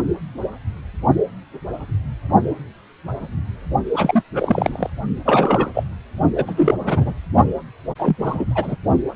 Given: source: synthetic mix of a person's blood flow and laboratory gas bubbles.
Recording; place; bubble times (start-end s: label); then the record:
Doppler ultrasound of blood flow; precordium
3.93-4.22 s: bubbles
4.33-4.90 s: bubbles
5.25-5.70 s: bubbles
5.74-5.83 s: bubbles
6.35-6.74 s: bubbles
6.78-7.13 s: bubbles
7.98-8.16 s: bubbles
8.21-8.46 s: bubbles
8.50-8.76 s: bubbles
From the record:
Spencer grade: 3 (all of the cardiac periods contain showers or single bubble signals, but not dominating or overriding the cardiac motion signals); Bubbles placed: only in the low amplitude regions of the cardiac cycle